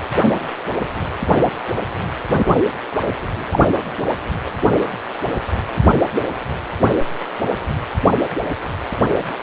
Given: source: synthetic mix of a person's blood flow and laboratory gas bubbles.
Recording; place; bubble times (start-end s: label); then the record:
Doppler ultrasound of blood flow; precordium
3.52-3.59 s: bubbles
From the record:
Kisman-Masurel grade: 113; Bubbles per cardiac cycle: 1 to 2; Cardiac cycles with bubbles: 1 to 10%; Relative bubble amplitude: loud (0.450 to 0.775); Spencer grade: 1 (occasional bubble signal discernible with the cardiac motion signal, with majority of cardiac periods free of bubbles); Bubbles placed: anywhere in the cardiac cycle